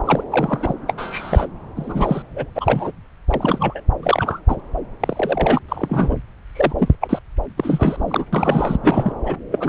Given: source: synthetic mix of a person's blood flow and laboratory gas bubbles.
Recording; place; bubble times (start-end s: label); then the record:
Doppler ultrasound of blood flow; subclavian vein
0.05-0.24 s: bubbles
0.32-0.74 s: bubbles
0.88-0.93 s: bubbles
0.97-1.47 s: bubbles
1.76-2.23 s: bubbles
2.34-2.50 s: bubbles
2.55-2.92 s: bubbles
3.27-3.82 s: bubbles
4.03-4.41 s: bubbles
4.49-4.56 s: bubbles
5.00-5.59 s: bubbles
5.69-6.17 s: bubbles
6.54-6.76 s: bubbles
6.78-6.96 s: bubbles
7.01-7.19 s: bubbles
7.57-8.25 s: bubbles
8.33-8.77 s: bubbles
8.83-9.13 s: bubbles
9.26-9.38 s: bubbles
9.52-9.69 s: bubbles
From the record:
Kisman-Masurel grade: 242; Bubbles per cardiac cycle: several, 3 to 8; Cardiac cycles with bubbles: 100%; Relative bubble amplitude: moderate (0.250 to 0.450); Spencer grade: 3 (all of the cardiac periods contain showers or single bubble signals, but not dominating or overriding the cardiac motion signals); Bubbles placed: anywhere in the cardiac cycle